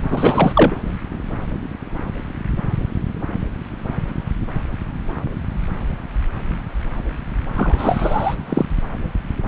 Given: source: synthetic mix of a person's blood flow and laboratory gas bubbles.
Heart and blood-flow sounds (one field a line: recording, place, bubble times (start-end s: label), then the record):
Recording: Doppler ultrasound of blood flow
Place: subclavian vein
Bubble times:
0.11-0.52 s: bubbles
0.55-0.76 s: bubbles
7.56-8.35 s: bubbles
8.49-8.65 s: bubbles
From the record:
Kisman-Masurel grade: 223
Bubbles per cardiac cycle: several, 3 to 8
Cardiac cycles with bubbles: 10 to 50%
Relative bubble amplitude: loud (0.450 to 0.775)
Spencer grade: 2 (many but less than half of the cardiac periods contain bubble signals, singularly or in groups)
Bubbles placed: anywhere in the cardiac cycle